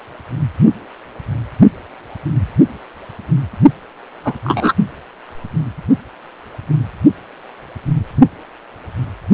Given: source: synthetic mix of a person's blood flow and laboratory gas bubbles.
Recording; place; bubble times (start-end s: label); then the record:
Doppler ultrasound of blood flow; precordium
4.24-4.33 s: bubbles
4.44-4.73 s: bubbles
From the record:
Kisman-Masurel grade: 113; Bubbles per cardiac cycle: 1 to 2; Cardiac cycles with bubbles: 1 to 10%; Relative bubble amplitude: loud (0.450 to 0.775); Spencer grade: 1 (occasional bubble signal discernible with the cardiac motion signal, with majority of cardiac periods free of bubbles); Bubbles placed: only in the low amplitude regions of the cardiac cycle